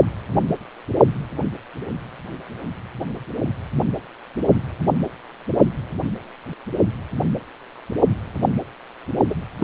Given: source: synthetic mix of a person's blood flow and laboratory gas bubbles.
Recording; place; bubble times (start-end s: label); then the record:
Doppler ultrasound of blood flow; precordium
9.29-9.35 s: bubbles
9.59-9.64 s: bubbles
From the record:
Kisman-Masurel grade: 223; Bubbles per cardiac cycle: several, 3 to 8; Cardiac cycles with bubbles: 10 to 50%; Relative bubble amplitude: loud (0.450 to 0.775); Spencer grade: 2 (many but less than half of the cardiac periods contain bubble signals, singularly or in groups); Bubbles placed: only in the low amplitude regions of the cardiac cycle